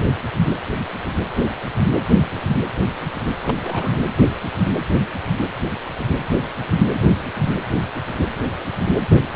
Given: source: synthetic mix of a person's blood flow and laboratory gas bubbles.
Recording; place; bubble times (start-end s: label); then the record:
Doppler ultrasound of blood flow; precordium
3.42-4.01 s: bubbles
From the record:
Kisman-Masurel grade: 221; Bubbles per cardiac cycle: several, 3 to 8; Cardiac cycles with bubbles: 10 to 50%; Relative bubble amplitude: barely perceptible (0.100 to 0.250); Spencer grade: 2 (many but less than half of the cardiac periods contain bubble signals, singularly or in groups); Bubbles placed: anywhere in the cardiac cycle